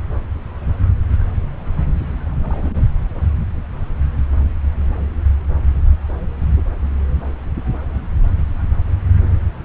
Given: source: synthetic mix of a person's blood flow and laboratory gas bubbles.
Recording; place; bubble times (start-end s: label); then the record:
Doppler ultrasound of blood flow; subclavian vein
2.40-2.85 s: bubbles
From the record:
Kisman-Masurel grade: 111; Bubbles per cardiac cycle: 1 to 2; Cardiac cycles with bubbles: 1 to 10%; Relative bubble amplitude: barely perceptible (0.100 to 0.250); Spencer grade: 1 (occasional bubble signal discernible with the cardiac motion signal, with majority of cardiac periods free of bubbles); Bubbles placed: anywhere in the cardiac cycle